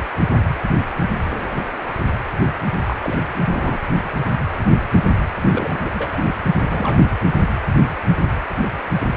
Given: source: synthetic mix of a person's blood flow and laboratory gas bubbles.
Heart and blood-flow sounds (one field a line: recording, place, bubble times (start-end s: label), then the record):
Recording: Doppler ultrasound of blood flow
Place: precordium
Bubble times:
2.86-2.96 s: bubbles
3.03-3.18 s: bubbles
3.44-3.78 s: bubbles
5.49-5.88 s: bubbles
5.94-6.25 s: bubbles
6.54-7.03 s: bubbles
From the record:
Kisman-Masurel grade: 221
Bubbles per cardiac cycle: several, 3 to 8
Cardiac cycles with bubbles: 10 to 50%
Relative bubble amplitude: barely perceptible (0.100 to 0.250)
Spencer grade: 2 (many but less than half of the cardiac periods contain bubble signals, singularly or in groups)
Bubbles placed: anywhere in the cardiac cycle